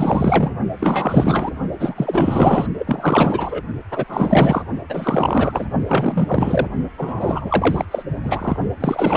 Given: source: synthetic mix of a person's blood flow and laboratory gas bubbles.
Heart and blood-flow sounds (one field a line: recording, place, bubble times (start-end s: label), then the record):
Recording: Doppler ultrasound of blood flow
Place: precordium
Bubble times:
0.00-0.52 s: bubbles
0.79-1.52 s: bubbles
1.79-2.67 s: bubbles
2.79-3.62 s: bubbles
3.91-4.04 s: bubbles
4.08-4.62 s: bubbles
4.89-5.67 s: bubbles
5.86-6.67 s: bubbles
6.97-7.85 s: bubbles
7.90-8.03 s: bubbles
8.23-8.56 s: bubbles
8.80-9.17 s: bubbles
From the record:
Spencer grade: 4 (maximum detectable bubble signal sounding continuously throughout systole and diastole of every cardiac period, and overriding the amplitude of the normal cardiac signals)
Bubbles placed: only in the low amplitude regions of the cardiac cycle